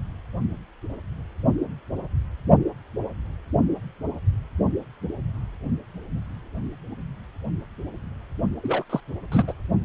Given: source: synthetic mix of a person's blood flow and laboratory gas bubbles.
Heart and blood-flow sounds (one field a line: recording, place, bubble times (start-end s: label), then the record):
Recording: Doppler ultrasound of blood flow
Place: precordium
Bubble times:
8.62-8.84 s: bubbles
8.90-9.01 s: bubbles
9.32-9.54 s: bubbles
From the record:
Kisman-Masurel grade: 212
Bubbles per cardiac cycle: several, 3 to 8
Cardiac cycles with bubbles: 1 to 10%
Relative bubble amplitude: moderate (0.250 to 0.450)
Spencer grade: 1 (occasional bubble signal discernible with the cardiac motion signal, with majority of cardiac periods free of bubbles)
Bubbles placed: only in the low amplitude regions of the cardiac cycle